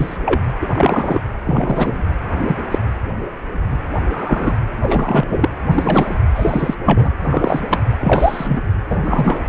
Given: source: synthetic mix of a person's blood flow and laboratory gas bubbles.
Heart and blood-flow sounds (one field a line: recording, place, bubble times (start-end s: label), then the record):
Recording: Doppler ultrasound of blood flow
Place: precordium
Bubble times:
0.00-0.17 s: bubbles
0.25-0.41 s: bubbles
0.60-0.68 s: bubbles
0.72-1.22 s: bubbles
1.46-2.02 s: bubbles
2.48-2.56 s: bubbles
2.71-2.79 s: bubbles
4.06-4.55 s: bubbles
4.81-5.49 s: bubbles
5.71-6.16 s: bubbles
6.35-6.75 s: bubbles
6.84-7.11 s: bubbles
7.23-7.65 s: bubbles
7.70-7.81 s: bubbles
8.01-8.61 s: bubbles
8.90-8.99 s: bubbles
9.04-9.40 s: bubbles
From the record:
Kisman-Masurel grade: 233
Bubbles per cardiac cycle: several, 3 to 8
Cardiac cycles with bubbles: 50 to 99%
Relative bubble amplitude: loud (0.450 to 0.775)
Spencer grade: 3 (all of the cardiac periods contain showers or single bubble signals, but not dominating or overriding the cardiac motion signals)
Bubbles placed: anywhere in the cardiac cycle